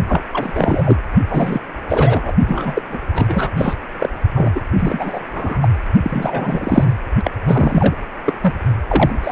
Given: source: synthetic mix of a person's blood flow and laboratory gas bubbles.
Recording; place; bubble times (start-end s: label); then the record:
Doppler ultrasound of blood flow; precordium
0.08-0.23 s: bubbles
0.33-0.97 s: bubbles
1.28-1.61 s: bubbles
1.89-2.33 s: bubbles
2.47-2.82 s: bubbles
2.90-2.98 s: bubbles
3.12-3.51 s: bubbles
3.57-3.77 s: bubbles
3.99-4.09 s: bubbles
4.35-4.61 s: bubbles
4.72-5.20 s: bubbles
5.30-5.69 s: bubbles
6.02-6.93 s: bubbles
7.24-7.31 s: bubbles
7.47-7.96 s: bubbles
8.26-8.33 s: bubbles
8.40-8.54 s: bubbles
8.88-9.18 s: bubbles
9.22-9.32 s: bubbles
From the record:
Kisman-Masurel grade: 343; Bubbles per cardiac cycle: rolling drumbeat, 9 or more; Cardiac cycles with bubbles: 100%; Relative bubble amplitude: loud (0.450 to 0.775); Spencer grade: 3 (all of the cardiac periods contain showers or single bubble signals, but not dominating or overriding the cardiac motion signals); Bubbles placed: only in the low amplitude regions of the cardiac cycle